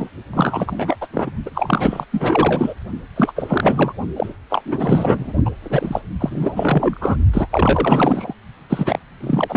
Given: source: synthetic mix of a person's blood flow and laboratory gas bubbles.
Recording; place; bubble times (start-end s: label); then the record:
Doppler ultrasound of blood flow; precordium
0.00-0.10 s: bubbles
0.33-0.96 s: bubbles
1.01-1.07 s: bubbles
1.12-1.29 s: bubbles
1.46-1.50 s: bubbles
1.54-2.05 s: bubbles
2.12-2.74 s: bubbles
3.16-3.33 s: bubbles
3.35-3.93 s: bubbles
4.16-4.26 s: bubbles
4.50-4.61 s: bubbles
4.65-5.33 s: bubbles
5.45-5.51 s: bubbles
5.62-6.01 s: bubbles
6.20-7.17 s: bubbles
7.33-7.47 s: bubbles
7.50-8.34 s: bubbles
8.70-8.99 s: bubbles
9.21-9.57 s: bubbles
From the record:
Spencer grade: 4 (maximum detectable bubble signal sounding continuously throughout systole and diastole of every cardiac period, and overriding the amplitude of the normal cardiac signals); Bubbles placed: only in the low amplitude regions of the cardiac cycle